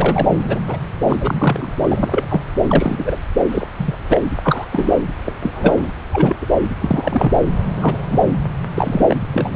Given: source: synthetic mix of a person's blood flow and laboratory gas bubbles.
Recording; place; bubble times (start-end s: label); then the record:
Doppler ultrasound of blood flow; subclavian vein
0.00-0.27 s: bubbles
0.47-0.59 s: bubbles
0.68-0.77 s: bubbles
1.07-1.17 s: bubbles
1.21-1.73 s: bubbles
1.82-2.27 s: bubbles
2.30-2.41 s: bubbles
2.65-3.17 s: bubbles
3.50-3.67 s: bubbles
3.78-3.96 s: bubbles
4.09-4.21 s: bubbles
4.44-4.65 s: bubbles
4.71-5.09 s: bubbles
5.25-5.35 s: bubbles
5.41-5.89 s: bubbles
6.12-6.37 s: bubbles
6.41-6.46 s: bubbles
6.81-7.32 s: bubbles
7.65-8.20 s: bubbles
8.75-9.17 s: bubbles
9.34-9.56 s: bubbles
From the record:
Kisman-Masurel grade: 243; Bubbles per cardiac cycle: several, 3 to 8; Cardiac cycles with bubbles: 100%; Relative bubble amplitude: loud (0.450 to 0.775); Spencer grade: 3 (all of the cardiac periods contain showers or single bubble signals, but not dominating or overriding the cardiac motion signals); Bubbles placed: anywhere in the cardiac cycle